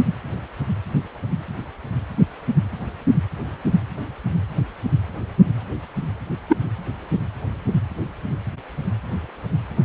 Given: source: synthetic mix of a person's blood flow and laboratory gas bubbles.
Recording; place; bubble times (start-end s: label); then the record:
Doppler ultrasound of blood flow; precordium
6.49-6.57 s: bubbles
From the record:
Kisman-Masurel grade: 113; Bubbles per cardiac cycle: 1 to 2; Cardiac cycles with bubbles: 1 to 10%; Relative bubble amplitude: loud (0.450 to 0.775); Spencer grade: 1 (occasional bubble signal discernible with the cardiac motion signal, with majority of cardiac periods free of bubbles); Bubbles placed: anywhere in the cardiac cycle